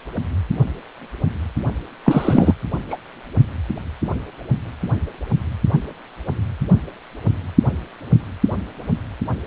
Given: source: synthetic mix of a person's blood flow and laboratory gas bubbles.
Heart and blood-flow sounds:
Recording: Doppler ultrasound of blood flow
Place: precordium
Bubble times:
2.05-2.53 s: bubbles
2.90-2.96 s: bubbles
From the record:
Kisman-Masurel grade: 213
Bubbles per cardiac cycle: several, 3 to 8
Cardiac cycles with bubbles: 1 to 10%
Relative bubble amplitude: loud (0.450 to 0.775)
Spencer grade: 1 (occasional bubble signal discernible with the cardiac motion signal, with majority of cardiac periods free of bubbles)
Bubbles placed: only in the low amplitude regions of the cardiac cycle

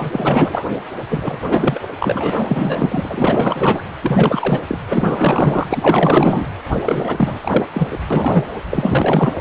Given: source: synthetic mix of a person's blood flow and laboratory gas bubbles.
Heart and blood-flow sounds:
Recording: Doppler ultrasound of blood flow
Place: precordium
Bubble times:
0.00-0.10 s: bubbles
0.13-0.67 s: bubbles
1.08-1.38 s: bubbles
1.50-1.84 s: bubbles
2.00-3.81 s: bubbles
4.02-4.63 s: bubbles
4.68-4.79 s: bubbles
4.89-5.66 s: bubbles
5.69-6.47 s: bubbles
6.80-7.67 s: bubbles
7.74-7.99 s: bubbles
8.10-8.45 s: bubbles
8.71-9.34 s: bubbles
From the record:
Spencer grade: 4 (maximum detectable bubble signal sounding continuously throughout systole and diastole of every cardiac period, and overriding the amplitude of the normal cardiac signals)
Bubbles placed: anywhere in the cardiac cycle

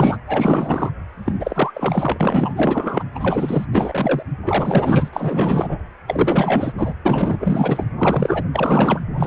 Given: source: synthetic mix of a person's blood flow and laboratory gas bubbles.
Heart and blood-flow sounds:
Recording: Doppler ultrasound of blood flow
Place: precordium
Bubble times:
0.00-0.18 s: bubbles
0.27-0.92 s: bubbles
1.25-1.71 s: bubbles
1.74-3.04 s: bubbles
3.15-3.67 s: bubbles
3.72-4.22 s: bubbles
4.46-5.09 s: bubbles
5.12-5.78 s: bubbles
6.08-6.74 s: bubbles
6.78-6.95 s: bubbles
7.05-7.38 s: bubbles
7.41-7.83 s: bubbles
7.99-8.45 s: bubbles
8.53-9.01 s: bubbles
9.15-9.27 s: bubbles
From the record:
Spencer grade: 4 (maximum detectable bubble signal sounding continuously throughout systole and diastole of every cardiac period, and overriding the amplitude of the normal cardiac signals)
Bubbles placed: anywhere in the cardiac cycle

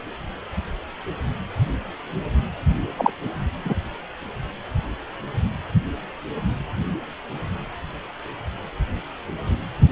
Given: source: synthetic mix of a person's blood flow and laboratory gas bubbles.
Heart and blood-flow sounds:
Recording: Doppler ultrasound of blood flow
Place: precordium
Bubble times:
2.98-3.10 s: bubbles
3.65-3.75 s: bubbles
From the record:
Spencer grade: 1 (occasional bubble signal discernible with the cardiac motion signal, with majority of cardiac periods free of bubbles)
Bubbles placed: anywhere in the cardiac cycle

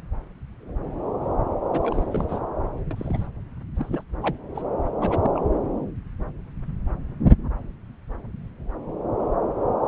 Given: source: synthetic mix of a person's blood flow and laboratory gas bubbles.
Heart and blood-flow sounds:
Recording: Doppler ultrasound of blood flow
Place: subclavian vein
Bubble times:
1.73-2.07 s: bubbles
2.10-2.40 s: bubbles
2.91-3.27 s: bubbles
3.75-4.03 s: bubbles
4.21-4.35 s: bubbles
4.54-4.63 s: bubbles
5.00-5.42 s: bubbles
From the record:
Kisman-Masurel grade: 221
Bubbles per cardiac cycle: several, 3 to 8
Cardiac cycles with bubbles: 10 to 50%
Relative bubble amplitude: barely perceptible (0.100 to 0.250)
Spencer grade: 2 (many but less than half of the cardiac periods contain bubble signals, singularly or in groups)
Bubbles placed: anywhere in the cardiac cycle

